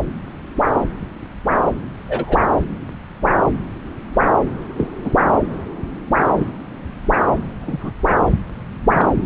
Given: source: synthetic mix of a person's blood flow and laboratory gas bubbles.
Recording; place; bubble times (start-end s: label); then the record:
Doppler ultrasound of blood flow; subclavian vein
2.08-2.38 s: bubbles
4.77-4.88 s: bubbles
5.04-5.16 s: bubbles
6.33-6.45 s: bubbles
7.61-7.91 s: bubbles
8.92-9.08 s: bubbles
From the record:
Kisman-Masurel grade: 122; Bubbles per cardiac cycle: 1 to 2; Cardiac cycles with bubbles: 10 to 50%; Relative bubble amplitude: moderate (0.250 to 0.450); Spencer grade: 2 (many but less than half of the cardiac periods contain bubble signals, singularly or in groups); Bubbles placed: anywhere in the cardiac cycle